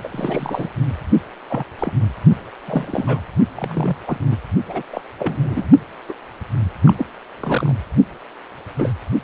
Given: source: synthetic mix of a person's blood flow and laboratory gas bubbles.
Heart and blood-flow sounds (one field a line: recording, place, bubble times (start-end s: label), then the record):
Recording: Doppler ultrasound of blood flow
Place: precordium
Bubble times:
0.03-0.08 s: bubbles
0.11-0.68 s: bubbles
1.50-1.64 s: bubbles
1.78-1.92 s: bubbles
2.67-3.21 s: bubbles
3.55-3.97 s: bubbles
4.07-4.18 s: bubbles
4.31-4.37 s: bubbles
4.67-4.83 s: bubbles
4.93-5.01 s: bubbles
5.18-5.70 s: bubbles
6.08-6.15 s: bubbles
6.84-6.94 s: bubbles
6.96-7.06 s: bubbles
7.40-7.75 s: bubbles
8.78-8.94 s: bubbles
From the record:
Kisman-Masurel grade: 242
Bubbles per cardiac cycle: several, 3 to 8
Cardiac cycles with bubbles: 100%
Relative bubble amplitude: moderate (0.250 to 0.450)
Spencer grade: 3 (all of the cardiac periods contain showers or single bubble signals, but not dominating or overriding the cardiac motion signals)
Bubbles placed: only in the low amplitude regions of the cardiac cycle